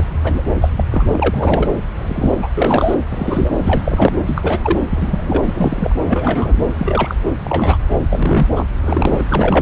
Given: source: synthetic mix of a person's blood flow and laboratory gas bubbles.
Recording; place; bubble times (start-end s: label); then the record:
Doppler ultrasound of blood flow; subclavian vein
0.00-0.04 s: bubbles
0.23-0.42 s: bubbles
0.60-0.72 s: bubbles
0.76-0.85 s: bubbles
0.91-1.07 s: bubbles
1.11-1.69 s: bubbles
1.97-2.40 s: bubbles
2.42-2.49 s: bubbles
2.57-2.95 s: bubbles
3.10-3.52 s: bubbles
3.62-4.16 s: bubbles
4.26-4.78 s: bubbles
4.89-5.96 s: bubbles
6.08-6.59 s: bubbles
6.78-7.15 s: bubbles
7.43-7.77 s: bubbles
8.10-8.48 s: bubbles
8.55-8.65 s: bubbles
8.84-9.61 s: bubbles
From the record:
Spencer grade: 3 (all of the cardiac periods contain showers or single bubble signals, but not dominating or overriding the cardiac motion signals); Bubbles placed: anywhere in the cardiac cycle